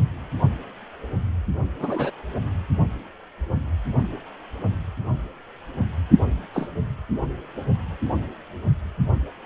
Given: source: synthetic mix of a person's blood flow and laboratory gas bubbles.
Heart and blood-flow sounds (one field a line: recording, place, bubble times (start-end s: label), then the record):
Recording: Doppler ultrasound of blood flow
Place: precordium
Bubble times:
1.79-2.11 s: bubbles
6.54-6.69 s: bubbles
From the record:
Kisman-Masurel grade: 122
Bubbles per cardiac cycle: 1 to 2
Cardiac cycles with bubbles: 10 to 50%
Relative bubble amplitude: moderate (0.250 to 0.450)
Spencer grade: 2 (many but less than half of the cardiac periods contain bubble signals, singularly or in groups)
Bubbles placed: only in the low amplitude regions of the cardiac cycle